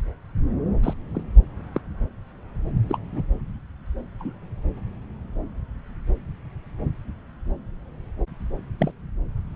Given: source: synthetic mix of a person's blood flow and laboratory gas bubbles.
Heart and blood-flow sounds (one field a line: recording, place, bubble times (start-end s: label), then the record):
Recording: Doppler ultrasound of blood flow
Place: subclavian vein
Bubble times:
0.83-0.93 s: bubbles
1.15-1.23 s: bubbles
1.73-1.81 s: bubbles
2.89-2.98 s: bubbles
3.12-3.22 s: bubbles
4.19-4.33 s: bubbles
8.78-8.91 s: bubbles
From the record:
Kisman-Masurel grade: 121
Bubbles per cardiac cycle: 1 to 2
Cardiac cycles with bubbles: 10 to 50%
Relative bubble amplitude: barely perceptible (0.100 to 0.250)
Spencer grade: 2 (many but less than half of the cardiac periods contain bubble signals, singularly or in groups)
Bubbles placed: anywhere in the cardiac cycle